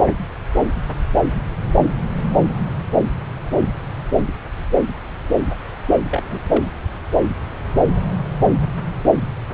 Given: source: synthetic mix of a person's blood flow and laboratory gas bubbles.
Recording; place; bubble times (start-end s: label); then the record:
Doppler ultrasound of blood flow; subclavian vein
6.10-6.23 s: bubbles
6.30-6.40 s: bubbles
6.49-6.67 s: bubbles
From the record:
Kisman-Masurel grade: 211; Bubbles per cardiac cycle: several, 3 to 8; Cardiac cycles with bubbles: 1 to 10%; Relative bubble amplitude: barely perceptible (0.100 to 0.250); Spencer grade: 1 (occasional bubble signal discernible with the cardiac motion signal, with majority of cardiac periods free of bubbles); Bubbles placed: anywhere in the cardiac cycle